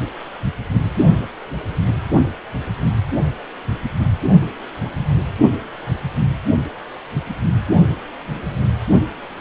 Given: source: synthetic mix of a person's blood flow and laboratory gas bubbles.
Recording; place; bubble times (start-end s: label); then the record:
Doppler ultrasound of blood flow; precordium
4.40-4.44 s: bubbles
4.82-4.92 s: bubbles
4.96-5.08 s: bubbles
From the record:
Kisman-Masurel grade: 211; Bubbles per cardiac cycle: several, 3 to 8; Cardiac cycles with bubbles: 1 to 10%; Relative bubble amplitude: barely perceptible (0.100 to 0.250); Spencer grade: 1 (occasional bubble signal discernible with the cardiac motion signal, with majority of cardiac periods free of bubbles); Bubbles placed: only in the low amplitude regions of the cardiac cycle